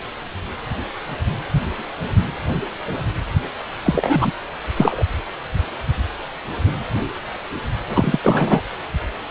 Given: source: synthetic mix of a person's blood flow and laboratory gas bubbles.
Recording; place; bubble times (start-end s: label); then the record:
Doppler ultrasound of blood flow; precordium
3.85-4.32 s: bubbles
4.77-5.04 s: bubbles
7.88-8.19 s: bubbles
8.23-8.62 s: bubbles
From the record:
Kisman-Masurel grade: 223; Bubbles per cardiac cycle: several, 3 to 8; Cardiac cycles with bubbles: 10 to 50%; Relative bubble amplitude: loud (0.450 to 0.775); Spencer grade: 2 (many but less than half of the cardiac periods contain bubble signals, singularly or in groups); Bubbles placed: anywhere in the cardiac cycle